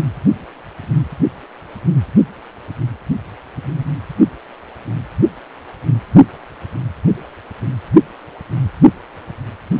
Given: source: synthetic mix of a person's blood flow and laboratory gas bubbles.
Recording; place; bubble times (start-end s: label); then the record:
Doppler ultrasound of blood flow; precordium
no bubbles
From the record:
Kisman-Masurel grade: 000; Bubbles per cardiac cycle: 0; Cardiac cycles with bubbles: 0%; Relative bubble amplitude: no bubbles discernible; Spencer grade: 0 (complete lack of bubble signals)